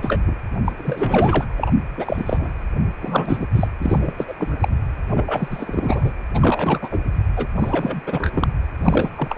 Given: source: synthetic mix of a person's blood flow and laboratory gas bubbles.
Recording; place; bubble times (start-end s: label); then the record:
Doppler ultrasound of blood flow; precordium
0.02-0.20 s: bubbles
0.27-0.35 s: bubbles
0.65-0.72 s: bubbles
0.77-1.46 s: bubbles
1.56-1.72 s: bubbles
1.97-2.62 s: bubbles
3.01-3.47 s: bubbles
3.54-3.68 s: bubbles
3.80-4.14 s: bubbles
4.17-4.34 s: bubbles
4.38-4.68 s: bubbles
5.09-6.13 s: bubbles
6.34-6.99 s: bubbles
7.36-7.47 s: bubbles
7.58-8.02 s: bubbles
8.06-8.48 s: bubbles
8.82-9.10 s: bubbles
9.16-9.38 s: bubbles
From the record:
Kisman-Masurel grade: 343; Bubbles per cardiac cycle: rolling drumbeat, 9 or more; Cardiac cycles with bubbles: 100%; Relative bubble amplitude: loud (0.450 to 0.775); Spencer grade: 3 (all of the cardiac periods contain showers or single bubble signals, but not dominating or overriding the cardiac motion signals); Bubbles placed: anywhere in the cardiac cycle